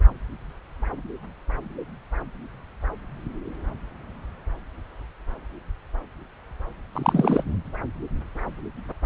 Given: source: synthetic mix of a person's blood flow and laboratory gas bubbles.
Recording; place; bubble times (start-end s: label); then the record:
Doppler ultrasound of blood flow; subclavian vein
6.93-7.44 s: bubbles
From the record:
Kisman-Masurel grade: 223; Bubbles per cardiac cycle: several, 3 to 8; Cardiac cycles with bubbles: 10 to 50%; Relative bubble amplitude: loud (0.450 to 0.775); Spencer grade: 2 (many but less than half of the cardiac periods contain bubble signals, singularly or in groups); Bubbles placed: anywhere in the cardiac cycle